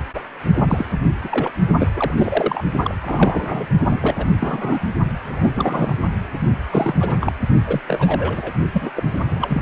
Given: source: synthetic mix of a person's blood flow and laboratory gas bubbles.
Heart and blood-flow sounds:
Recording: Doppler ultrasound of blood flow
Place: precordium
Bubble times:
0.00-0.02 s: bubbles
0.14-0.21 s: bubbles
0.54-0.86 s: bubbles
1.23-1.51 s: bubbles
1.79-1.88 s: bubbles
1.94-2.14 s: bubbles
2.17-2.64 s: bubbles
2.82-2.94 s: bubbles
3.02-3.67 s: bubbles
3.90-4.26 s: bubbles
4.39-4.79 s: bubbles
5.24-5.96 s: bubbles
6.71-6.95 s: bubbles
7.00-7.17 s: bubbles
7.21-7.33 s: bubbles
7.67-7.81 s: bubbles
7.87-8.53 s: bubbles
8.72-8.91 s: bubbles
8.96-9.04 s: bubbles
9.11-9.62 s: bubbles
From the record:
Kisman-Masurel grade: 342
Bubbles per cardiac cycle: rolling drumbeat, 9 or more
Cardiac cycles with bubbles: 100%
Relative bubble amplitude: moderate (0.250 to 0.450)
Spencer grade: 3 (all of the cardiac periods contain showers or single bubble signals, but not dominating or overriding the cardiac motion signals)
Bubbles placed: only in the low amplitude regions of the cardiac cycle

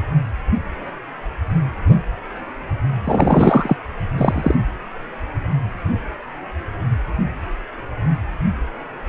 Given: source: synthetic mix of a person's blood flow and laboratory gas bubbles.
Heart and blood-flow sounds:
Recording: Doppler ultrasound of blood flow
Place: precordium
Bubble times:
3.04-3.76 s: bubbles
4.17-4.54 s: bubbles
From the record:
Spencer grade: 2 (many but less than half of the cardiac periods contain bubble signals, singularly or in groups)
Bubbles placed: anywhere in the cardiac cycle

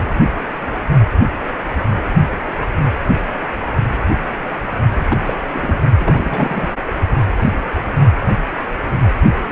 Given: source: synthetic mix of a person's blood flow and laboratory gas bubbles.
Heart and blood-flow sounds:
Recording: Doppler ultrasound of blood flow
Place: precordium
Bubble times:
4.94-5.19 s: bubbles
5.25-5.33 s: bubbles
5.53-5.79 s: bubbles
5.99-6.73 s: bubbles
6.86-6.94 s: bubbles
From the record:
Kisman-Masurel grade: 222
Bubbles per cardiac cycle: several, 3 to 8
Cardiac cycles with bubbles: 10 to 50%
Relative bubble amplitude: moderate (0.250 to 0.450)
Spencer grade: 2 (many but less than half of the cardiac periods contain bubble signals, singularly or in groups)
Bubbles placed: only in the low amplitude regions of the cardiac cycle

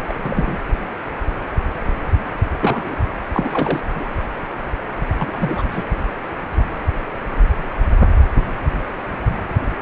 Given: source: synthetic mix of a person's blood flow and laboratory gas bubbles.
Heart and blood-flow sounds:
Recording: Doppler ultrasound of blood flow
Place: precordium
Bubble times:
0.08-0.14 s: bubbles
0.18-0.59 s: bubbles
2.60-2.97 s: bubbles
3.33-3.80 s: bubbles
3.96-4.05 s: bubbles
5.17-5.62 s: bubbles
5.71-5.84 s: bubbles
From the record:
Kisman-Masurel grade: 222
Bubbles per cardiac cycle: several, 3 to 8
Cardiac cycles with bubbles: 10 to 50%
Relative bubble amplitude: moderate (0.250 to 0.450)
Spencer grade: 2 (many but less than half of the cardiac periods contain bubble signals, singularly or in groups)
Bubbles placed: anywhere in the cardiac cycle

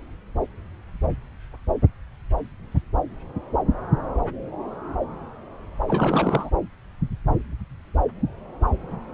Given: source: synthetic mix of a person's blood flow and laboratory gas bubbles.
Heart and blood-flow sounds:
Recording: Doppler ultrasound of blood flow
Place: subclavian vein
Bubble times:
5.88-6.50 s: bubbles
From the record:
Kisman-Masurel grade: 212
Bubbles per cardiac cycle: several, 3 to 8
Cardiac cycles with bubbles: 1 to 10%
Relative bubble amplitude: moderate (0.250 to 0.450)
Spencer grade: 1 (occasional bubble signal discernible with the cardiac motion signal, with majority of cardiac periods free of bubbles)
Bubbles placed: anywhere in the cardiac cycle

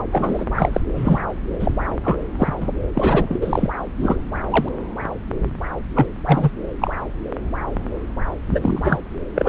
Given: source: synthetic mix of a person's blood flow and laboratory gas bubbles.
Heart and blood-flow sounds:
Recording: Doppler ultrasound of blood flow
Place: subclavian vein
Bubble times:
0.11-0.45 s: bubbles
0.56-0.81 s: bubbles
0.94-1.20 s: bubbles
1.59-1.72 s: bubbles
2.04-2.17 s: bubbles
2.39-2.54 s: bubbles
2.60-2.68 s: bubbles
2.95-3.70 s: bubbles
3.99-4.16 s: bubbles
4.50-4.68 s: bubbles
5.94-6.07 s: bubbles
6.26-6.50 s: bubbles
6.81-6.90 s: bubbles
8.50-9.00 s: bubbles
9.35-9.49 s: bubbles
From the record:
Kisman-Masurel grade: 233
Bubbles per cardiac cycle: several, 3 to 8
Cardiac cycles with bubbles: 50 to 99%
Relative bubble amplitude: loud (0.450 to 0.775)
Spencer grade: 3 (all of the cardiac periods contain showers or single bubble signals, but not dominating or overriding the cardiac motion signals)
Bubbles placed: anywhere in the cardiac cycle

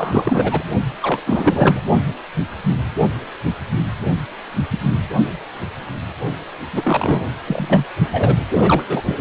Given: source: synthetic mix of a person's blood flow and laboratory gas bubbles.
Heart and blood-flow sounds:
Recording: Doppler ultrasound of blood flow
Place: precordium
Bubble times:
0.00-0.64 s: bubbles
1.02-1.21 s: bubbles
1.24-1.80 s: bubbles
6.73-7.31 s: bubbles
7.46-7.84 s: bubbles
8.12-8.41 s: bubbles
8.54-8.83 s: bubbles
8.88-9.21 s: bubbles
From the record:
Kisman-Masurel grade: 332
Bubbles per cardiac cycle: rolling drumbeat, 9 or more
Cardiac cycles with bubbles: 50 to 99%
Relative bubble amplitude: moderate (0.250 to 0.450)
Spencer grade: 3 (all of the cardiac periods contain showers or single bubble signals, but not dominating or overriding the cardiac motion signals)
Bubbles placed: only in the low amplitude regions of the cardiac cycle

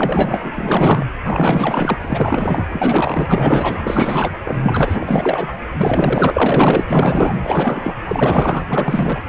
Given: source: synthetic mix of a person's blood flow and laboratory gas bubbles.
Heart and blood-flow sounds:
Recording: Doppler ultrasound of blood flow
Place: precordium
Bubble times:
0.00-1.06 s: bubbles
1.25-1.98 s: bubbles
2.01-2.67 s: bubbles
2.72-3.81 s: bubbles
3.84-4.33 s: bubbles
4.44-5.52 s: bubbles
5.77-6.85 s: bubbles
6.88-7.94 s: bubbles
8.06-8.65 s: bubbles
8.69-9.21 s: bubbles
From the record:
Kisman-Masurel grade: 444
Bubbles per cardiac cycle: continuous sound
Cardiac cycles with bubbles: 100%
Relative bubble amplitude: maximal (0.775 to 0.999)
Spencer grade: 4 (maximum detectable bubble signal sounding continuously throughout systole and diastole of every cardiac period, and overriding the amplitude of the normal cardiac signals)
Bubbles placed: anywhere in the cardiac cycle

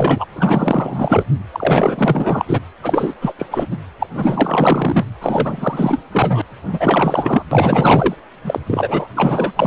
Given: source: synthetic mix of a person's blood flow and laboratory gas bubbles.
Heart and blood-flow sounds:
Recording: Doppler ultrasound of blood flow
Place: precordium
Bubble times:
0.00-0.26 s: bubbles
0.33-1.24 s: bubbles
1.52-2.60 s: bubbles
2.83-3.15 s: bubbles
3.21-3.33 s: bubbles
3.39-3.46 s: bubbles
3.50-3.67 s: bubbles
3.71-3.77 s: bubbles
3.99-4.07 s: bubbles
4.15-5.05 s: bubbles
5.21-6.02 s: bubbles
6.11-6.42 s: bubbles
6.67-7.43 s: bubbles
7.51-8.15 s: bubbles
8.44-8.60 s: bubbles
8.66-9.08 s: bubbles
9.16-9.53 s: bubbles
9.55-9.67 s: bubbles
From the record:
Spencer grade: 4 (maximum detectable bubble signal sounding continuously throughout systole and diastole of every cardiac period, and overriding the amplitude of the normal cardiac signals)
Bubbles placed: anywhere in the cardiac cycle

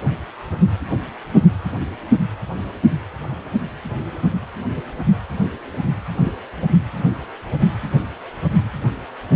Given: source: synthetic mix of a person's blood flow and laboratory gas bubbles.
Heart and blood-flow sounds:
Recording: Doppler ultrasound of blood flow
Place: precordium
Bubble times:
6.23-6.35 s: bubbles
From the record:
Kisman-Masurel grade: 112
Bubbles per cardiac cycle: 1 to 2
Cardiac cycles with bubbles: 1 to 10%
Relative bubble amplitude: moderate (0.250 to 0.450)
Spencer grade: 1 (occasional bubble signal discernible with the cardiac motion signal, with majority of cardiac periods free of bubbles)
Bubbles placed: anywhere in the cardiac cycle

